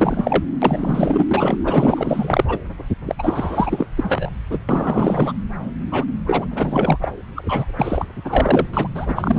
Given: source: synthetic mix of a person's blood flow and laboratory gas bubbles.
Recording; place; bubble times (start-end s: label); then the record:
Doppler ultrasound of blood flow; subclavian vein
0.00-0.44 s: bubbles
0.61-1.57 s: bubbles
1.64-2.45 s: bubbles
2.48-2.58 s: bubbles
3.06-3.15 s: bubbles
3.19-3.87 s: bubbles
3.97-4.30 s: bubbles
4.49-4.59 s: bubbles
4.68-5.32 s: bubbles
5.91-6.04 s: bubbles
6.26-6.45 s: bubbles
6.50-6.98 s: bubbles
7.01-7.11 s: bubbles
7.35-7.72 s: bubbles
7.79-8.05 s: bubbles
8.24-8.67 s: bubbles
8.73-8.88 s: bubbles
8.95-9.39 s: bubbles
From the record:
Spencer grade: 4 (maximum detectable bubble signal sounding continuously throughout systole and diastole of every cardiac period, and overriding the amplitude of the normal cardiac signals); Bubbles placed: anywhere in the cardiac cycle